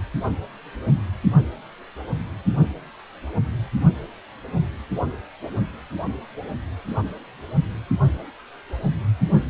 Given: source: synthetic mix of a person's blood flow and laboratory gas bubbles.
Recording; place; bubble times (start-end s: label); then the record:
Doppler ultrasound of blood flow; precordium
no bubbles
From the record:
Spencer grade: 0 (complete lack of bubble signals)